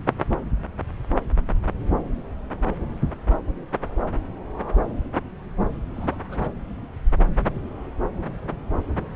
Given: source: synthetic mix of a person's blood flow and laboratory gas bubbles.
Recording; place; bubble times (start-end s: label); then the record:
Doppler ultrasound of blood flow; subclavian vein
5.93-6.17 s: bubbles
6.29-6.51 s: bubbles
From the record:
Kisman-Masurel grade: 211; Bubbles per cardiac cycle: several, 3 to 8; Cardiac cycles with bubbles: 1 to 10%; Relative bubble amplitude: barely perceptible (0.100 to 0.250); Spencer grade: 1 (occasional bubble signal discernible with the cardiac motion signal, with majority of cardiac periods free of bubbles); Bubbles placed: anywhere in the cardiac cycle